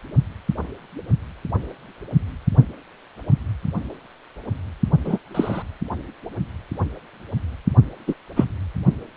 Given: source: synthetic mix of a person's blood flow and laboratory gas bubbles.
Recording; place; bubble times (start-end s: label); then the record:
Doppler ultrasound of blood flow; precordium
5.04-5.18 s: bubbles
5.34-5.62 s: bubbles
8.07-8.14 s: bubbles
8.35-8.44 s: bubbles
From the record:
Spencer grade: 2 (many but less than half of the cardiac periods contain bubble signals, singularly or in groups); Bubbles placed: only in the low amplitude regions of the cardiac cycle